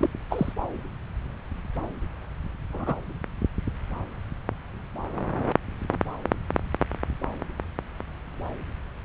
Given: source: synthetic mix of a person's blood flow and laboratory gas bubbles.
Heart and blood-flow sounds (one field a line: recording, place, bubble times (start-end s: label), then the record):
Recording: Doppler ultrasound of blood flow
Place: subclavian vein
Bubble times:
0.01-0.09 s: bubbles
0.30-0.52 s: bubbles
2.72-2.94 s: bubbles
From the record:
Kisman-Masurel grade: 122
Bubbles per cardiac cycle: 1 to 2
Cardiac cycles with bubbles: 10 to 50%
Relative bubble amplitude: moderate (0.250 to 0.450)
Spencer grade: 2 (many but less than half of the cardiac periods contain bubble signals, singularly or in groups)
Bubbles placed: anywhere in the cardiac cycle